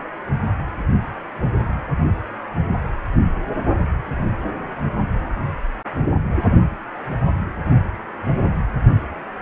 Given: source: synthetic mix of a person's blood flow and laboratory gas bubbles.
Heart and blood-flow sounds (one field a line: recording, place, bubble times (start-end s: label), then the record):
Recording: Doppler ultrasound of blood flow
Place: precordium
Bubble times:
no bubbles
From the record:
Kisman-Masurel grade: 000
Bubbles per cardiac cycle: 0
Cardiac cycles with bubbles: 0%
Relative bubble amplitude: no bubbles discernible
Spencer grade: 0 (complete lack of bubble signals)